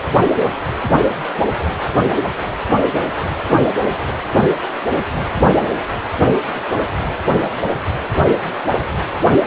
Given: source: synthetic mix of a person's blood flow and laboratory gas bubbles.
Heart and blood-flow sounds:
Doppler ultrasound of blood flow; precordium
no bubbles
From the record:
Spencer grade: 0 (complete lack of bubble signals)

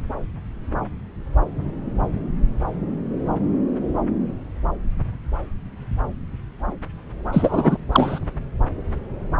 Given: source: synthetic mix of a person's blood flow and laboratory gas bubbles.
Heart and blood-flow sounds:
Doppler ultrasound of blood flow; subclavian vein
7.33-7.78 s: bubbles
7.92-8.20 s: bubbles
From the record:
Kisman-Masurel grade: 223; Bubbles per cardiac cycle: several, 3 to 8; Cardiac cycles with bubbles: 10 to 50%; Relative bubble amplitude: loud (0.450 to 0.775); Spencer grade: 2 (many but less than half of the cardiac periods contain bubble signals, singularly or in groups); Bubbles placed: anywhere in the cardiac cycle

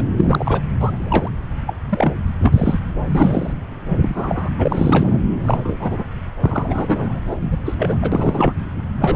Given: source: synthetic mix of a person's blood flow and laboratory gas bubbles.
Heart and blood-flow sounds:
Doppler ultrasound of blood flow; subclavian vein
0.00-0.05 s: bubbles
0.17-0.61 s: bubbles
0.80-1.31 s: bubbles
1.67-1.74 s: bubbles
1.90-2.12 s: bubbles
2.42-2.79 s: bubbles
3.06-3.53 s: bubbles
4.00-4.50 s: bubbles
4.58-5.21 s: bubbles
5.40-5.77 s: bubbles
5.79-6.04 s: bubbles
6.42-7.20 s: bubbles
7.31-7.36 s: bubbles
7.42-7.58 s: bubbles
7.65-7.75 s: bubbles
7.78-8.54 s: bubbles
8.98-9.16 s: bubbles
From the record:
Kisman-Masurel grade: 242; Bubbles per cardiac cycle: several, 3 to 8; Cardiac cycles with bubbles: 100%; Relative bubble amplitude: moderate (0.250 to 0.450); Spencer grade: 3 (all of the cardiac periods contain showers or single bubble signals, but not dominating or overriding the cardiac motion signals); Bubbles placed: anywhere in the cardiac cycle

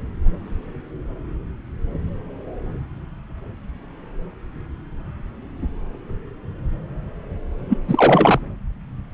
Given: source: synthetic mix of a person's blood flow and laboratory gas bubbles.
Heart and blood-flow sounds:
Doppler ultrasound of blood flow; subclavian vein
7.68-7.78 s: bubbles
7.88-8.40 s: bubbles
From the record:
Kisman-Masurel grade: 213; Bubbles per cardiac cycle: several, 3 to 8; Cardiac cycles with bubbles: 1 to 10%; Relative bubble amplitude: loud (0.450 to 0.775); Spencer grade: 1 (occasional bubble signal discernible with the cardiac motion signal, with majority of cardiac periods free of bubbles); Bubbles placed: anywhere in the cardiac cycle

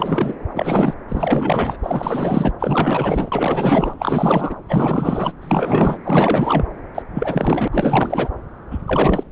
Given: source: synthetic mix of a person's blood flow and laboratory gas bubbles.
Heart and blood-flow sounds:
Doppler ultrasound of blood flow; subclavian vein
0.00-0.35 s: bubbles
0.55-0.95 s: bubbles
1.08-1.77 s: bubbles
1.83-2.52 s: bubbles
2.59-3.93 s: bubbles
3.98-4.55 s: bubbles
4.68-5.33 s: bubbles
5.41-5.98 s: bubbles
6.04-6.65 s: bubbles
6.94-7.02 s: bubbles
7.14-7.68 s: bubbles
7.71-8.29 s: bubbles
8.71-8.79 s: bubbles
8.87-9.23 s: bubbles
From the record:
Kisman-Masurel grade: 444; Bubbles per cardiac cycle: continuous sound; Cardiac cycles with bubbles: 100%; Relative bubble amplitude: maximal (0.775 to 0.999); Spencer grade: 4 (maximum detectable bubble signal sounding continuously throughout systole and diastole of every cardiac period, and overriding the amplitude of the normal cardiac signals); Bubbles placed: anywhere in the cardiac cycle

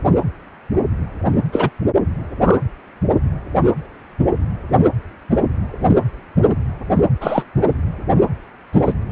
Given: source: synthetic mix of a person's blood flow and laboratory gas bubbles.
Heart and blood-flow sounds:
Doppler ultrasound of blood flow; precordium
1.52-1.69 s: bubbles
2.44-2.59 s: bubbles
5.87-5.96 s: bubbles
7.21-7.43 s: bubbles
8.72-8.93 s: bubbles
From the record:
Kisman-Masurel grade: 123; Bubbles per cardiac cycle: 1 to 2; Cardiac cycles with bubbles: 10 to 50%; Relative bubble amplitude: loud (0.450 to 0.775); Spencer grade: 2 (many but less than half of the cardiac periods contain bubble signals, singularly or in groups); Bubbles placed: anywhere in the cardiac cycle

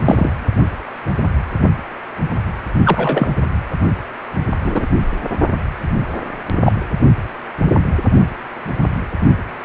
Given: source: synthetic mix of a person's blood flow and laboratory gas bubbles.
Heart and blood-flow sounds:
Doppler ultrasound of blood flow; precordium
0.04-0.32 s: bubbles
2.85-3.28 s: bubbles
4.63-4.86 s: bubbles
6.63-6.72 s: bubbles
From the record:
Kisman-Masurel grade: 123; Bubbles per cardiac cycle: 1 to 2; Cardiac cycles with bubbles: 10 to 50%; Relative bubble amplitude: loud (0.450 to 0.775); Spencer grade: 2 (many but less than half of the cardiac periods contain bubble signals, singularly or in groups); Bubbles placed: only in the low amplitude regions of the cardiac cycle

